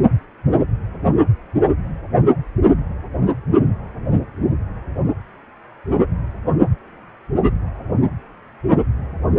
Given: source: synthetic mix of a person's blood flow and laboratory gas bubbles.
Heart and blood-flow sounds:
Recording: Doppler ultrasound of blood flow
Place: precordium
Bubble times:
no bubbles
From the record:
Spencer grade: 0 (complete lack of bubble signals)

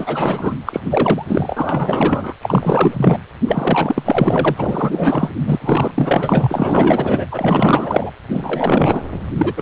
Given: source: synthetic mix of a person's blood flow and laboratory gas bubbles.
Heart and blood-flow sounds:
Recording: Doppler ultrasound of blood flow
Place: precordium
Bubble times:
0.00-0.56 s: bubbles
0.66-0.80 s: bubbles
0.85-1.25 s: bubbles
1.28-2.33 s: bubbles
2.42-3.18 s: bubbles
3.47-5.30 s: bubbles
5.46-5.91 s: bubbles
5.94-7.26 s: bubbles
7.31-8.11 s: bubbles
8.29-9.03 s: bubbles
9.38-9.53 s: bubbles
9.57-9.61 s: bubbles
From the record:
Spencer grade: 4 (maximum detectable bubble signal sounding continuously throughout systole and diastole of every cardiac period, and overriding the amplitude of the normal cardiac signals)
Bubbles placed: anywhere in the cardiac cycle

